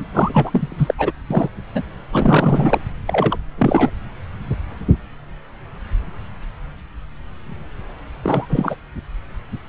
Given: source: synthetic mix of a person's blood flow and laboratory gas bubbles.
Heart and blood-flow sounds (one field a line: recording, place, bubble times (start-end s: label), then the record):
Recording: Doppler ultrasound of blood flow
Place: subclavian vein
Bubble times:
0.00-0.05 s: bubbles
0.12-0.94 s: bubbles
0.98-1.12 s: bubbles
1.31-1.50 s: bubbles
1.75-1.83 s: bubbles
2.11-2.80 s: bubbles
3.07-3.36 s: bubbles
3.57-3.91 s: bubbles
8.23-8.46 s: bubbles
8.49-8.76 s: bubbles
From the record:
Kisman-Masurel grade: 332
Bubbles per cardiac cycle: rolling drumbeat, 9 or more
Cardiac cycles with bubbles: 50 to 99%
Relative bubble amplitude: moderate (0.250 to 0.450)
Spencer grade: 3 (all of the cardiac periods contain showers or single bubble signals, but not dominating or overriding the cardiac motion signals)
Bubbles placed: anywhere in the cardiac cycle